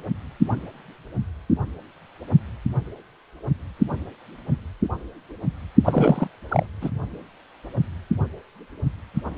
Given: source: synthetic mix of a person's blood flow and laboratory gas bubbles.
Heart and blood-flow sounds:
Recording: Doppler ultrasound of blood flow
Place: precordium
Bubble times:
5.84-6.28 s: bubbles
6.49-6.66 s: bubbles
6.81-6.90 s: bubbles
From the record:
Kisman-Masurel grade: 222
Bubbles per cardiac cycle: several, 3 to 8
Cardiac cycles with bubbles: 10 to 50%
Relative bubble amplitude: moderate (0.250 to 0.450)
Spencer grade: 2 (many but less than half of the cardiac periods contain bubble signals, singularly or in groups)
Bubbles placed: anywhere in the cardiac cycle

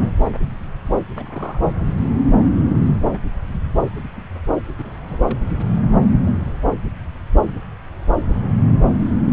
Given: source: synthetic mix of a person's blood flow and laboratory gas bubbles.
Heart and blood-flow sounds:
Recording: Doppler ultrasound of blood flow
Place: subclavian vein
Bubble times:
0.00-0.13 s: bubbles
0.17-0.31 s: bubbles
0.34-0.53 s: bubbles
1.15-1.71 s: bubbles
4.78-4.91 s: bubbles
5.07-5.18 s: bubbles
5.23-5.40 s: bubbles
From the record:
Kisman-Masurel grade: 221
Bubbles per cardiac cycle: several, 3 to 8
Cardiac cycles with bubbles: 10 to 50%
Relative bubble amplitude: barely perceptible (0.100 to 0.250)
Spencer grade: 2 (many but less than half of the cardiac periods contain bubble signals, singularly or in groups)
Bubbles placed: anywhere in the cardiac cycle

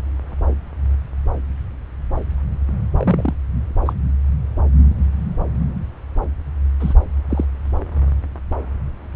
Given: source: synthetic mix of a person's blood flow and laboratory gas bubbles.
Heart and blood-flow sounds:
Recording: Doppler ultrasound of blood flow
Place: subclavian vein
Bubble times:
2.97-3.34 s: bubbles
3.85-3.93 s: bubbles
6.79-6.94 s: bubbles
7.29-7.45 s: bubbles
From the record:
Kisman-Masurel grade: 122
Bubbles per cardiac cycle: 1 to 2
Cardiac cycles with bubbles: 10 to 50%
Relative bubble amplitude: moderate (0.250 to 0.450)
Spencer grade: 2 (many but less than half of the cardiac periods contain bubble signals, singularly or in groups)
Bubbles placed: anywhere in the cardiac cycle

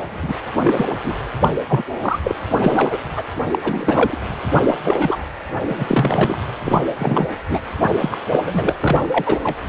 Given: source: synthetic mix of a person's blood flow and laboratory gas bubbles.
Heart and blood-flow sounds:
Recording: Doppler ultrasound of blood flow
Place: precordium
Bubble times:
0.04-0.39 s: bubbles
0.58-0.86 s: bubbles
1.04-1.15 s: bubbles
1.40-1.48 s: bubbles
1.68-1.83 s: bubbles
2.00-2.19 s: bubbles
2.23-2.35 s: bubbles
2.61-2.98 s: bubbles
3.15-3.23 s: bubbles
3.51-3.58 s: bubbles
3.61-4.18 s: bubbles
4.66-4.75 s: bubbles
4.85-5.17 s: bubbles
5.68-6.37 s: bubbles
6.64-6.81 s: bubbles
6.99-7.28 s: bubbles
7.49-7.61 s: bubbles
8.00-8.17 s: bubbles
8.32-8.40 s: bubbles
8.46-8.72 s: bubbles
8.81-9.39 s: bubbles
9.43-9.55 s: bubbles
From the record:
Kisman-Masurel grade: 243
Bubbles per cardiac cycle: several, 3 to 8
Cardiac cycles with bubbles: 100%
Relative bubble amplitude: loud (0.450 to 0.775)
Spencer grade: 3 (all of the cardiac periods contain showers or single bubble signals, but not dominating or overriding the cardiac motion signals)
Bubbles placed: anywhere in the cardiac cycle

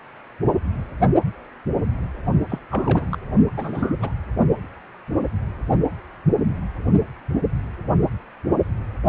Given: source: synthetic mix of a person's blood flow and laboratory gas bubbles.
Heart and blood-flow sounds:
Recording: Doppler ultrasound of blood flow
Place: precordium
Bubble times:
2.50-2.58 s: bubbles
2.71-3.18 s: bubbles
3.56-4.13 s: bubbles
From the record:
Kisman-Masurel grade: 221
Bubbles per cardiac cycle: several, 3 to 8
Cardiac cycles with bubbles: 10 to 50%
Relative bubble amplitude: barely perceptible (0.100 to 0.250)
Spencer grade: 2 (many but less than half of the cardiac periods contain bubble signals, singularly or in groups)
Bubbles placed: only in the low amplitude regions of the cardiac cycle

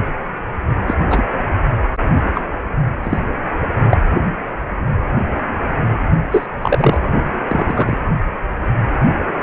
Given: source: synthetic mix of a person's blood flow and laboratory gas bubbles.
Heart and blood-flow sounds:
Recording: Doppler ultrasound of blood flow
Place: precordium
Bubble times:
0.86-0.95 s: bubbles
1.10-1.22 s: bubbles
2.35-2.42 s: bubbles
3.03-3.19 s: bubbles
3.91-3.97 s: bubbles
6.32-6.47 s: bubbles
6.62-6.97 s: bubbles
7.46-7.97 s: bubbles
From the record:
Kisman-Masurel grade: 123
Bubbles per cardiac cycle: 1 to 2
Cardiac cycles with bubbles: 10 to 50%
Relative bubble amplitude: loud (0.450 to 0.775)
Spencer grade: 2 (many but less than half of the cardiac periods contain bubble signals, singularly or in groups)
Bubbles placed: anywhere in the cardiac cycle

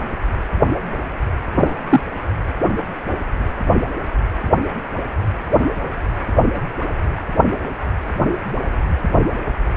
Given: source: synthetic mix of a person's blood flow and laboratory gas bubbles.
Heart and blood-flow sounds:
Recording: Doppler ultrasound of blood flow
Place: precordium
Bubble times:
1.58-1.73 s: bubbles
1.89-2.00 s: bubbles
From the record:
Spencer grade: 1 (occasional bubble signal discernible with the cardiac motion signal, with majority of cardiac periods free of bubbles)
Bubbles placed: anywhere in the cardiac cycle

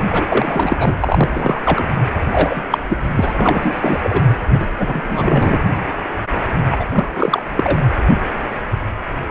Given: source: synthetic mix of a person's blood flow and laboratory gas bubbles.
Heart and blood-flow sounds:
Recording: Doppler ultrasound of blood flow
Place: precordium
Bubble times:
0.09-0.95 s: bubbles
1.00-1.87 s: bubbles
2.31-2.62 s: bubbles
2.71-2.78 s: bubbles
2.89-2.98 s: bubbles
3.16-3.33 s: bubbles
3.37-4.34 s: bubbles
4.49-4.66 s: bubbles
4.78-5.57 s: bubbles
6.69-6.85 s: bubbles
6.93-7.42 s: bubbles
7.55-7.81 s: bubbles
From the record:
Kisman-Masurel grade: 333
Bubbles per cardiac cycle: rolling drumbeat, 9 or more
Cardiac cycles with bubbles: 50 to 99%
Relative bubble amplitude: loud (0.450 to 0.775)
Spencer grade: 3 (all of the cardiac periods contain showers or single bubble signals, but not dominating or overriding the cardiac motion signals)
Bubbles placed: anywhere in the cardiac cycle

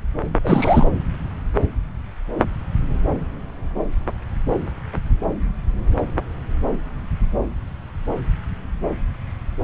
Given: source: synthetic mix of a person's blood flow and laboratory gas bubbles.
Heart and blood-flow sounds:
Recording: Doppler ultrasound of blood flow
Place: subclavian vein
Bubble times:
0.44-0.85 s: bubbles
From the record:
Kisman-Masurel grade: 212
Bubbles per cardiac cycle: several, 3 to 8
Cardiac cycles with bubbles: 1 to 10%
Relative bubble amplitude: moderate (0.250 to 0.450)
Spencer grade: 1 (occasional bubble signal discernible with the cardiac motion signal, with majority of cardiac periods free of bubbles)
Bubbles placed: anywhere in the cardiac cycle

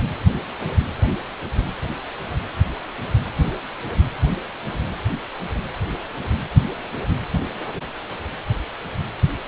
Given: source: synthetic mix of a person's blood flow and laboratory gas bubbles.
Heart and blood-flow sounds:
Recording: Doppler ultrasound of blood flow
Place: precordium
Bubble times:
no bubbles
From the record:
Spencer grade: 0 (complete lack of bubble signals)

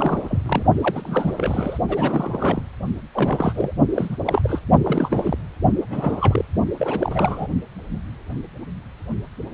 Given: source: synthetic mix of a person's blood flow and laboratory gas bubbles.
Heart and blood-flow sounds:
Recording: Doppler ultrasound of blood flow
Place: precordium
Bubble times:
0.00-0.42 s: bubbles
0.45-0.63 s: bubbles
0.80-1.77 s: bubbles
1.88-2.63 s: bubbles
3.12-3.73 s: bubbles
3.95-4.17 s: bubbles
4.26-4.60 s: bubbles
4.84-5.38 s: bubbles
5.90-6.45 s: bubbles
6.79-7.46 s: bubbles
From the record:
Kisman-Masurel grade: 332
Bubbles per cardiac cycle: rolling drumbeat, 9 or more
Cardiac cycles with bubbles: 50 to 99%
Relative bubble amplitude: moderate (0.250 to 0.450)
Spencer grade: 3 (all of the cardiac periods contain showers or single bubble signals, but not dominating or overriding the cardiac motion signals)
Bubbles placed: only in the low amplitude regions of the cardiac cycle

